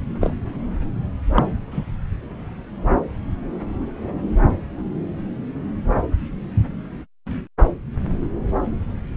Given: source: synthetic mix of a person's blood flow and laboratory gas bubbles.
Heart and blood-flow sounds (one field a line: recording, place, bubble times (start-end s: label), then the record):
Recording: Doppler ultrasound of blood flow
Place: subclavian vein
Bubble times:
0.21-0.33 s: bubbles
1.34-1.43 s: bubbles
1.71-1.87 s: bubbles
From the record:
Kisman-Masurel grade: 123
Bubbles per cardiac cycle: 1 to 2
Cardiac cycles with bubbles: 10 to 50%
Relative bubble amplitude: loud (0.450 to 0.775)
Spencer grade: 2 (many but less than half of the cardiac periods contain bubble signals, singularly or in groups)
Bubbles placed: anywhere in the cardiac cycle